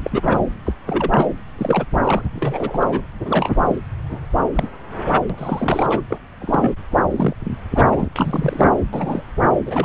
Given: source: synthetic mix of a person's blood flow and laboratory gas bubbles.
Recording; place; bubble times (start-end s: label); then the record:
Doppler ultrasound of blood flow; subclavian vein
0.03-0.41 s: bubbles
0.66-0.72 s: bubbles
0.86-1.27 s: bubbles
1.58-1.85 s: bubbles
2.03-2.28 s: bubbles
2.35-2.87 s: bubbles
2.90-3.00 s: bubbles
3.25-3.78 s: bubbles
4.11-4.18 s: bubbles
4.53-4.67 s: bubbles
5.29-5.87 s: bubbles
5.90-6.01 s: bubbles
6.10-6.19 s: bubbles
6.41-6.73 s: bubbles
7.11-7.33 s: bubbles
7.75-8.09 s: bubbles
8.16-8.70 s: bubbles
8.93-9.21 s: bubbles
9.66-9.85 s: bubbles
From the record:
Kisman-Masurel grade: 242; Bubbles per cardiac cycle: several, 3 to 8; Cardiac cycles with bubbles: 100%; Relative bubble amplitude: moderate (0.250 to 0.450); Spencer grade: 3 (all of the cardiac periods contain showers or single bubble signals, but not dominating or overriding the cardiac motion signals); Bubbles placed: anywhere in the cardiac cycle